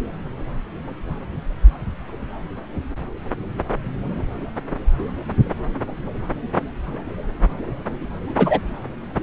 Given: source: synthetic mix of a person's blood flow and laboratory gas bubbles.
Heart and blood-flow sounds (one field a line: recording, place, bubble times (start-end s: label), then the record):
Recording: Doppler ultrasound of blood flow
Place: subclavian vein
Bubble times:
8.37-8.59 s: bubbles
From the record:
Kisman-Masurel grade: 113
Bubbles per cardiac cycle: 1 to 2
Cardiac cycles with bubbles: 1 to 10%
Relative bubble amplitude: loud (0.450 to 0.775)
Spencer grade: 1 (occasional bubble signal discernible with the cardiac motion signal, with majority of cardiac periods free of bubbles)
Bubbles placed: anywhere in the cardiac cycle